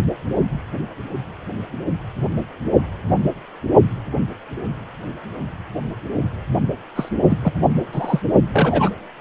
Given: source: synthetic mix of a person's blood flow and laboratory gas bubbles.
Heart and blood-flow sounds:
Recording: Doppler ultrasound of blood flow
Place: precordium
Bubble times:
6.95-7.09 s: bubbles
7.29-7.37 s: bubbles
7.44-7.52 s: bubbles
7.92-8.20 s: bubbles
8.53-8.90 s: bubbles
From the record:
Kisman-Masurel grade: 223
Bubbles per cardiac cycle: several, 3 to 8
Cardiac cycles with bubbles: 10 to 50%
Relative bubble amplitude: loud (0.450 to 0.775)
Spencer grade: 2 (many but less than half of the cardiac periods contain bubble signals, singularly or in groups)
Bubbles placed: only in the low amplitude regions of the cardiac cycle

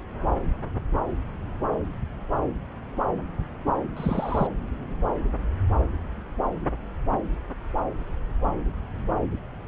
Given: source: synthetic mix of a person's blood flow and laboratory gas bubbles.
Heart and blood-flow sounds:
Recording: Doppler ultrasound of blood flow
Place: subclavian vein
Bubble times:
3.96-4.47 s: bubbles
From the record:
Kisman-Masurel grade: 121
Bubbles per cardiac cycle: 1 to 2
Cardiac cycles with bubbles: 10 to 50%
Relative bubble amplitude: barely perceptible (0.100 to 0.250)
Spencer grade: 2 (many but less than half of the cardiac periods contain bubble signals, singularly or in groups)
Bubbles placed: anywhere in the cardiac cycle

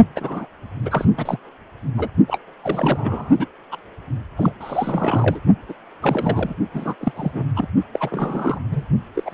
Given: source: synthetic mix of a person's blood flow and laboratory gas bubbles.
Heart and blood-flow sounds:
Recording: Doppler ultrasound of blood flow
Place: precordium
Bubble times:
0.15-0.46 s: bubbles
0.82-1.05 s: bubbles
1.17-1.38 s: bubbles
1.97-2.08 s: bubbles
2.27-2.38 s: bubbles
2.62-3.46 s: bubbles
3.71-3.76 s: bubbles
4.37-4.52 s: bubbles
4.60-5.40 s: bubbles
5.68-5.74 s: bubbles
6.02-6.54 s: bubbles
6.74-6.96 s: bubbles
7.00-7.12 s: bubbles
7.16-7.45 s: bubbles
7.56-7.67 s: bubbles
7.93-8.59 s: bubbles
8.71-8.85 s: bubbles
9.15-9.34 s: bubbles
From the record:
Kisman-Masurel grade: 342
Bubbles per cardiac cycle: rolling drumbeat, 9 or more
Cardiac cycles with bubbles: 100%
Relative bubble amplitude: moderate (0.250 to 0.450)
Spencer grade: 3 (all of the cardiac periods contain showers or single bubble signals, but not dominating or overriding the cardiac motion signals)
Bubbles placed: only in the low amplitude regions of the cardiac cycle

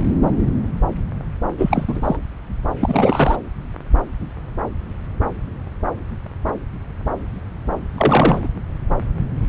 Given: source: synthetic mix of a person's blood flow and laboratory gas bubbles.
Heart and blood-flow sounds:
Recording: Doppler ultrasound of blood flow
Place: subclavian vein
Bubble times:
1.58-2.17 s: bubbles
2.81-3.37 s: bubbles
7.97-8.47 s: bubbles
From the record:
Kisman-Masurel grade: 223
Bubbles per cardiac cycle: several, 3 to 8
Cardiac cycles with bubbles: 10 to 50%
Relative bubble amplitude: loud (0.450 to 0.775)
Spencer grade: 2 (many but less than half of the cardiac periods contain bubble signals, singularly or in groups)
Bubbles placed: anywhere in the cardiac cycle

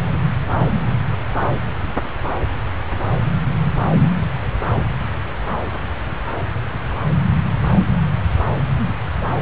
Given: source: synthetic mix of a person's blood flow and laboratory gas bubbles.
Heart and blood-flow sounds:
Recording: Doppler ultrasound of blood flow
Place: subclavian vein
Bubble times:
no bubbles
From the record:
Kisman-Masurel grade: 000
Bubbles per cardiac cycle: 0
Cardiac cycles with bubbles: 0%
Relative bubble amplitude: no bubbles discernible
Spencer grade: 0 (complete lack of bubble signals)

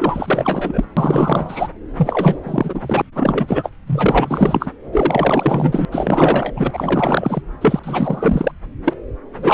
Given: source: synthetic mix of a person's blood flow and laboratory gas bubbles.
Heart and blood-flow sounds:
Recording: Doppler ultrasound of blood flow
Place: subclavian vein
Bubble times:
0.00-0.84 s: bubbles
0.97-1.68 s: bubbles
1.97-2.40 s: bubbles
2.43-3.02 s: bubbles
3.15-3.70 s: bubbles
3.87-4.71 s: bubbles
4.92-5.85 s: bubbles
5.92-6.53 s: bubbles
6.56-7.42 s: bubbles
7.61-7.79 s: bubbles
7.84-8.52 s: bubbles
8.84-8.94 s: bubbles
9.36-9.54 s: bubbles
From the record:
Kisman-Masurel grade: 444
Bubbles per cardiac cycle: continuous sound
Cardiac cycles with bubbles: 100%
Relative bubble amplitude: maximal (0.775 to 0.999)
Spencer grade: 4 (maximum detectable bubble signal sounding continuously throughout systole and diastole of every cardiac period, and overriding the amplitude of the normal cardiac signals)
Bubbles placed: anywhere in the cardiac cycle

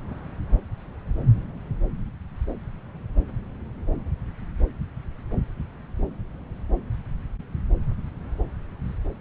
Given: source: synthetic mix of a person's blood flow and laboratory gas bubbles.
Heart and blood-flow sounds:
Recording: Doppler ultrasound of blood flow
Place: subclavian vein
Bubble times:
no bubbles
From the record:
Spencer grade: 0 (complete lack of bubble signals)

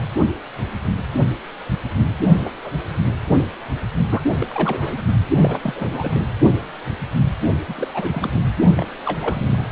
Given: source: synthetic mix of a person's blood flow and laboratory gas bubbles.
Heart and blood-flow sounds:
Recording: Doppler ultrasound of blood flow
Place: precordium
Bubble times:
2.37-2.57 s: bubbles
2.64-2.70 s: bubbles
3.37-3.45 s: bubbles
4.09-4.23 s: bubbles
4.41-5.04 s: bubbles
5.42-5.59 s: bubbles
5.63-6.26 s: bubbles
7.67-7.88 s: bubbles
7.94-8.41 s: bubbles
8.76-8.89 s: bubbles
9.05-9.67 s: bubbles
From the record:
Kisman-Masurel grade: 232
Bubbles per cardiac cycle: several, 3 to 8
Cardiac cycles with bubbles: 50 to 99%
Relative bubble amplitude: moderate (0.250 to 0.450)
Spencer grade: 3 (all of the cardiac periods contain showers or single bubble signals, but not dominating or overriding the cardiac motion signals)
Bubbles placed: only in the low amplitude regions of the cardiac cycle

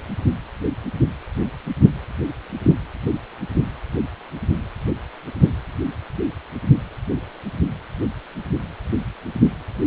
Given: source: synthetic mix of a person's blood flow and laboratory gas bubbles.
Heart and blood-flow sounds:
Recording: Doppler ultrasound of blood flow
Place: precordium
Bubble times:
2.62-2.73 s: bubbles
From the record:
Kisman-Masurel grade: 112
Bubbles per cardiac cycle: 1 to 2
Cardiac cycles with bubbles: 1 to 10%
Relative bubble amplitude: moderate (0.250 to 0.450)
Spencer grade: 1 (occasional bubble signal discernible with the cardiac motion signal, with majority of cardiac periods free of bubbles)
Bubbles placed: anywhere in the cardiac cycle

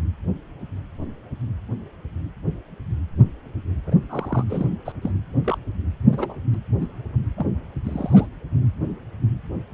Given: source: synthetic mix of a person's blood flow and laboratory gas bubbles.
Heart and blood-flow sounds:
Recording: Doppler ultrasound of blood flow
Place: precordium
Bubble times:
3.87-3.95 s: bubbles
4.09-4.45 s: bubbles
4.49-4.67 s: bubbles
4.85-4.92 s: bubbles
5.01-5.11 s: bubbles
5.45-5.58 s: bubbles
6.12-6.41 s: bubbles
6.54-6.57 s: bubbles
6.80-6.87 s: bubbles
7.38-7.46 s: bubbles
7.84-8.27 s: bubbles
From the record:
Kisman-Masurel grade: 221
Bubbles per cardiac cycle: several, 3 to 8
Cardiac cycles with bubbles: 10 to 50%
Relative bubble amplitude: barely perceptible (0.100 to 0.250)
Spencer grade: 2 (many but less than half of the cardiac periods contain bubble signals, singularly or in groups)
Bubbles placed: anywhere in the cardiac cycle

